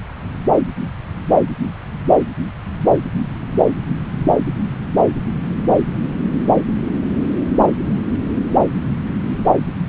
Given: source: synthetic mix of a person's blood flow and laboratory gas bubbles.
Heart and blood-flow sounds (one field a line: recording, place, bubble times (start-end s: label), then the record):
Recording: Doppler ultrasound of blood flow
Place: subclavian vein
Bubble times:
2.93-3.01 s: bubbles
From the record:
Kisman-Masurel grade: 111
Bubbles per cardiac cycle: 1 to 2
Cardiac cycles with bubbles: 1 to 10%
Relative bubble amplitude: barely perceptible (0.100 to 0.250)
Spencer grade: 1 (occasional bubble signal discernible with the cardiac motion signal, with majority of cardiac periods free of bubbles)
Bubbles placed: anywhere in the cardiac cycle